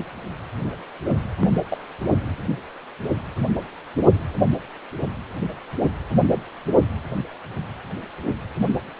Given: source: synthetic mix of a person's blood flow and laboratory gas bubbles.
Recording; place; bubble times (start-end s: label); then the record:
Doppler ultrasound of blood flow; precordium
1.40-1.55 s: bubbles
1.68-1.78 s: bubbles
From the record:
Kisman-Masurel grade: 111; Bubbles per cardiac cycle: 1 to 2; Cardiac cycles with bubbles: 1 to 10%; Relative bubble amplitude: barely perceptible (0.100 to 0.250); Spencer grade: 1 (occasional bubble signal discernible with the cardiac motion signal, with majority of cardiac periods free of bubbles); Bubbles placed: only in the low amplitude regions of the cardiac cycle